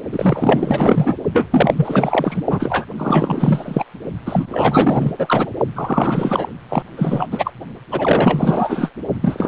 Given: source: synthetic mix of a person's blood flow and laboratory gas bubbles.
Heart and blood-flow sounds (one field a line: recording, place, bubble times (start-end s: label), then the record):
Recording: Doppler ultrasound of blood flow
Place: precordium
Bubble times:
0.12-1.17 s: bubbles
1.33-1.49 s: bubbles
1.51-2.42 s: bubbles
2.50-2.85 s: bubbles
2.97-3.85 s: bubbles
4.25-5.12 s: bubbles
5.17-5.52 s: bubbles
5.76-6.49 s: bubbles
6.69-6.83 s: bubbles
6.96-7.27 s: bubbles
7.31-7.53 s: bubbles
7.91-8.91 s: bubbles
9.21-9.48 s: bubbles
From the record:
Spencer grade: 4 (maximum detectable bubble signal sounding continuously throughout systole and diastole of every cardiac period, and overriding the amplitude of the normal cardiac signals)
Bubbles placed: only in the low amplitude regions of the cardiac cycle